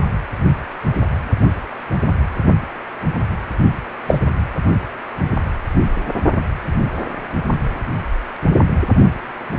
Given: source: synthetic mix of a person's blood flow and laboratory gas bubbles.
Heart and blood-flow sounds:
Doppler ultrasound of blood flow; precordium
4.06-4.18 s: bubbles
From the record:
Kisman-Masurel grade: 113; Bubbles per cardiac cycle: 1 to 2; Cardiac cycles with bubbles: 1 to 10%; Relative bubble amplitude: loud (0.450 to 0.775); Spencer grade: 1 (occasional bubble signal discernible with the cardiac motion signal, with majority of cardiac periods free of bubbles); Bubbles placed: only in the low amplitude regions of the cardiac cycle

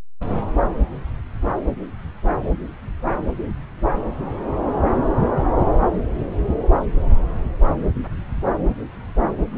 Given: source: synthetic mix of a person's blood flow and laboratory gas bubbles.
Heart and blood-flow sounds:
Doppler ultrasound of blood flow; subclavian vein
no bubbles
From the record:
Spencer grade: 0 (complete lack of bubble signals)

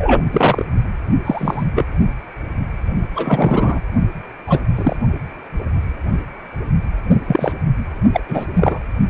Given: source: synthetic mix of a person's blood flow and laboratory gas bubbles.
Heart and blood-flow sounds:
Doppler ultrasound of blood flow; precordium
0.00-0.22 s: bubbles
0.33-0.66 s: bubbles
1.25-1.64 s: bubbles
1.75-1.84 s: bubbles
3.14-3.79 s: bubbles
4.46-4.60 s: bubbles
4.75-4.96 s: bubbles
7.28-7.53 s: bubbles
8.13-8.21 s: bubbles
8.28-8.46 s: bubbles
8.54-8.79 s: bubbles
From the record:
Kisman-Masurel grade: 233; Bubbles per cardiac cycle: several, 3 to 8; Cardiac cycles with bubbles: 50 to 99%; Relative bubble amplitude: loud (0.450 to 0.775); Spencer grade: 3 (all of the cardiac periods contain showers or single bubble signals, but not dominating or overriding the cardiac motion signals); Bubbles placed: only in the low amplitude regions of the cardiac cycle

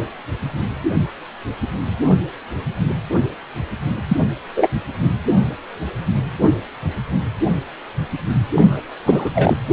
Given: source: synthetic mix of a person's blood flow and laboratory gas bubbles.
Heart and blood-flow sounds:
Doppler ultrasound of blood flow; precordium
4.08-4.17 s: bubbles
4.56-4.69 s: bubbles
8.55-8.81 s: bubbles
9.05-9.30 s: bubbles
9.34-9.57 s: bubbles
From the record:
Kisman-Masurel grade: 223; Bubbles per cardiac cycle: several, 3 to 8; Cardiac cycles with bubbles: 10 to 50%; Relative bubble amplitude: loud (0.450 to 0.775); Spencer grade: 2 (many but less than half of the cardiac periods contain bubble signals, singularly or in groups); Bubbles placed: anywhere in the cardiac cycle

